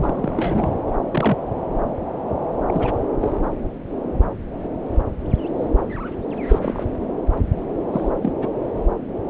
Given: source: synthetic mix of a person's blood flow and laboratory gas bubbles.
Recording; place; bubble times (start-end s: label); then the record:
Doppler ultrasound of blood flow; subclavian vein
0.00-0.74 s: bubbles
0.86-0.97 s: bubbles
1.12-1.38 s: bubbles
2.67-3.00 s: bubbles
3.20-3.33 s: bubbles
6.47-6.86 s: bubbles
7.92-8.10 s: bubbles
8.22-8.33 s: bubbles
8.40-8.50 s: bubbles
From the record:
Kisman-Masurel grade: 222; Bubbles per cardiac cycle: several, 3 to 8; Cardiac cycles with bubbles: 10 to 50%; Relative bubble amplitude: moderate (0.250 to 0.450); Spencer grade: 2 (many but less than half of the cardiac periods contain bubble signals, singularly or in groups); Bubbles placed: anywhere in the cardiac cycle